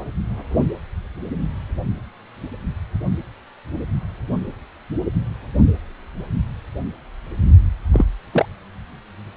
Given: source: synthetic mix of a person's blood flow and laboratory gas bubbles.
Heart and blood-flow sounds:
Doppler ultrasound of blood flow; precordium
7.92-8.05 s: bubbles
8.31-8.46 s: bubbles
From the record:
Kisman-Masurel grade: 112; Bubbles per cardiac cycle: 1 to 2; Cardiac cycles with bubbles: 1 to 10%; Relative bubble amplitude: moderate (0.250 to 0.450); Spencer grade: 1 (occasional bubble signal discernible with the cardiac motion signal, with majority of cardiac periods free of bubbles); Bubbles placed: only in the low amplitude regions of the cardiac cycle

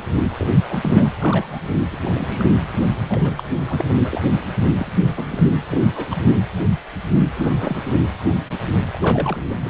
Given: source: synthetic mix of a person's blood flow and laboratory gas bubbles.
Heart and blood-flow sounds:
Doppler ultrasound of blood flow; precordium
0.37-0.47 s: bubbles
0.69-0.80 s: bubbles
0.83-1.09 s: bubbles
1.12-1.63 s: bubbles
1.91-1.97 s: bubbles
2.05-2.52 s: bubbles
3.08-3.33 s: bubbles
3.38-3.44 s: bubbles
3.67-3.85 s: bubbles
4.00-4.21 s: bubbles
4.76-5.12 s: bubbles
5.16-5.43 s: bubbles
5.70-5.87 s: bubbles
5.93-6.22 s: bubbles
7.35-7.77 s: bubbles
7.88-8.00 s: bubbles
8.92-9.38 s: bubbles
9.50-9.54 s: bubbles
9.59-9.70 s: bubbles
From the record:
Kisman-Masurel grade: 232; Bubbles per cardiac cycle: several, 3 to 8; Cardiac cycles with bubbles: 50 to 99%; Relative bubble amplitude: moderate (0.250 to 0.450); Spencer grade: 3 (all of the cardiac periods contain showers or single bubble signals, but not dominating or overriding the cardiac motion signals); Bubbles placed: anywhere in the cardiac cycle

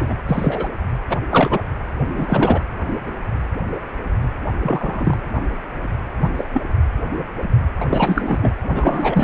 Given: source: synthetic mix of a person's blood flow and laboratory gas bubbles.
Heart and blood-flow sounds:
Doppler ultrasound of blood flow; precordium
0.00-0.14 s: bubbles
0.28-0.68 s: bubbles
1.08-1.19 s: bubbles
1.31-1.62 s: bubbles
2.14-2.63 s: bubbles
4.62-5.17 s: bubbles
6.21-6.29 s: bubbles
6.38-6.44 s: bubbles
6.53-6.62 s: bubbles
7.77-7.86 s: bubbles
7.89-8.51 s: bubbles
8.71-9.24 s: bubbles
From the record:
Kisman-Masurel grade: 233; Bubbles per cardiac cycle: several, 3 to 8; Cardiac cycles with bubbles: 50 to 99%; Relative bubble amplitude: loud (0.450 to 0.775); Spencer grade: 3 (all of the cardiac periods contain showers or single bubble signals, but not dominating or overriding the cardiac motion signals); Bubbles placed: anywhere in the cardiac cycle

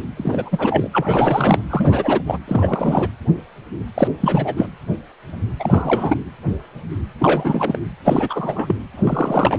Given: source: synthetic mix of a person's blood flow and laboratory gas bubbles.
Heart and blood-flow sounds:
Doppler ultrasound of blood flow; precordium
0.16-0.88 s: bubbles
0.93-1.66 s: bubbles
1.70-2.20 s: bubbles
2.26-2.38 s: bubbles
2.47-3.09 s: bubbles
3.94-4.08 s: bubbles
4.20-4.67 s: bubbles
5.59-6.17 s: bubbles
7.19-7.78 s: bubbles
8.04-8.76 s: bubbles
8.96-9.59 s: bubbles
From the record:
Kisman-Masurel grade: 332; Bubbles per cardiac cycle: rolling drumbeat, 9 or more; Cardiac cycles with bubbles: 50 to 99%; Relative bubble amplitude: moderate (0.250 to 0.450); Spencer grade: 3 (all of the cardiac periods contain showers or single bubble signals, but not dominating or overriding the cardiac motion signals); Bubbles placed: anywhere in the cardiac cycle

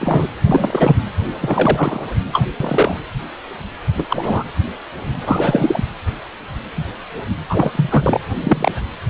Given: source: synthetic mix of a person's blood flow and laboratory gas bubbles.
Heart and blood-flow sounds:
Doppler ultrasound of blood flow; precordium
0.00-0.28 s: bubbles
0.46-0.98 s: bubbles
1.41-2.06 s: bubbles
2.32-2.47 s: bubbles
2.60-2.96 s: bubbles
3.97-4.06 s: bubbles
4.10-4.44 s: bubbles
5.26-5.84 s: bubbles
7.49-8.21 s: bubbles
8.41-8.72 s: bubbles
From the record:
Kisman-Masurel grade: 233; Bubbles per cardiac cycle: several, 3 to 8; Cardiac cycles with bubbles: 50 to 99%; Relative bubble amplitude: loud (0.450 to 0.775); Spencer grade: 3 (all of the cardiac periods contain showers or single bubble signals, but not dominating or overriding the cardiac motion signals); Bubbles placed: anywhere in the cardiac cycle

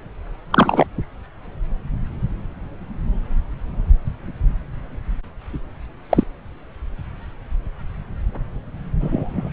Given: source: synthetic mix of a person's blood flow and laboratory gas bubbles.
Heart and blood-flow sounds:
Doppler ultrasound of blood flow; subclavian vein
0.51-0.86 s: bubbles
6.09-6.23 s: bubbles
9.00-9.50 s: bubbles
From the record:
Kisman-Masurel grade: 123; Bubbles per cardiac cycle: 1 to 2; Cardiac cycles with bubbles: 10 to 50%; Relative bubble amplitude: loud (0.450 to 0.775); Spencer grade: 2 (many but less than half of the cardiac periods contain bubble signals, singularly or in groups); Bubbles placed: anywhere in the cardiac cycle

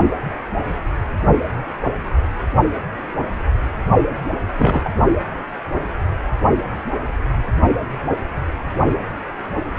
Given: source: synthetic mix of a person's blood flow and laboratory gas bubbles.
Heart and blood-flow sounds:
Doppler ultrasound of blood flow; precordium
4.58-4.90 s: bubbles
From the record:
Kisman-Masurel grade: 113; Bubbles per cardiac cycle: 1 to 2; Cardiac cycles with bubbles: 1 to 10%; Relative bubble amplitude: loud (0.450 to 0.775); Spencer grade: 1 (occasional bubble signal discernible with the cardiac motion signal, with majority of cardiac periods free of bubbles); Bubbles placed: only in the low amplitude regions of the cardiac cycle

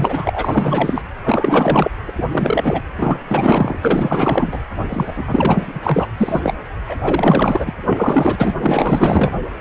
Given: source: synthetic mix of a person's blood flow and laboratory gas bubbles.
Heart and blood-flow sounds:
Doppler ultrasound of blood flow; precordium
0.00-1.03 s: bubbles
1.24-1.91 s: bubbles
2.07-2.12 s: bubbles
2.15-2.81 s: bubbles
2.97-3.19 s: bubbles
3.28-3.79 s: bubbles
3.81-4.59 s: bubbles
4.89-5.25 s: bubbles
5.27-5.79 s: bubbles
5.83-6.07 s: bubbles
6.17-6.54 s: bubbles
6.89-6.96 s: bubbles
7.03-7.73 s: bubbles
7.83-8.54 s: bubbles
8.61-9.34 s: bubbles
From the record:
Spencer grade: 4 (maximum detectable bubble signal sounding continuously throughout systole and diastole of every cardiac period, and overriding the amplitude of the normal cardiac signals); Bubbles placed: anywhere in the cardiac cycle

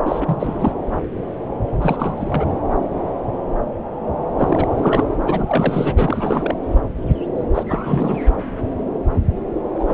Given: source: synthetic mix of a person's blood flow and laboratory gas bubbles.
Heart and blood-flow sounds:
Doppler ultrasound of blood flow; subclavian vein
0.05-0.72 s: bubbles
1.81-2.45 s: bubbles
4.38-4.67 s: bubbles
4.76-5.04 s: bubbles
5.25-5.93 s: bubbles
5.96-6.55 s: bubbles
7.54-7.63 s: bubbles
7.69-8.22 s: bubbles
9.79-9.85 s: bubbles
9.88-9.94 s: bubbles
From the record:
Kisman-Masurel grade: 332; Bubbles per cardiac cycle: rolling drumbeat, 9 or more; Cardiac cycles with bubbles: 50 to 99%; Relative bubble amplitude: moderate (0.250 to 0.450); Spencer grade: 3 (all of the cardiac periods contain showers or single bubble signals, but not dominating or overriding the cardiac motion signals); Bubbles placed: anywhere in the cardiac cycle

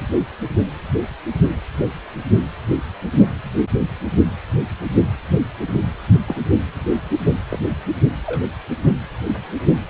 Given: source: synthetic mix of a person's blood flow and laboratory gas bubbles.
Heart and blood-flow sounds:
Doppler ultrasound of blood flow; precordium
6.26-6.42 s: bubbles
7.50-7.58 s: bubbles
8.26-8.46 s: bubbles
From the record:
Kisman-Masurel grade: 122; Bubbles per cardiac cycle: 1 to 2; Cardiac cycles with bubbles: 10 to 50%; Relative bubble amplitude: moderate (0.250 to 0.450); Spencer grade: 2 (many but less than half of the cardiac periods contain bubble signals, singularly or in groups); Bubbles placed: only in the low amplitude regions of the cardiac cycle

